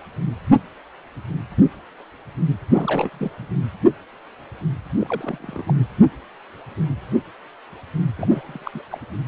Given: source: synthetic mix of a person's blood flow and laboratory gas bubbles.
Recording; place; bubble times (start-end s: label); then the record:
Doppler ultrasound of blood flow; precordium
2.72-3.10 s: bubbles
3.12-3.48 s: bubbles
4.99-5.63 s: bubbles
5.67-5.74 s: bubbles
8.16-8.71 s: bubbles
8.73-8.82 s: bubbles
8.90-8.98 s: bubbles
From the record:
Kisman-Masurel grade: 221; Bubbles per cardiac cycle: several, 3 to 8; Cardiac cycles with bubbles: 10 to 50%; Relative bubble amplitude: barely perceptible (0.100 to 0.250); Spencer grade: 2 (many but less than half of the cardiac periods contain bubble signals, singularly or in groups); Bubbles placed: anywhere in the cardiac cycle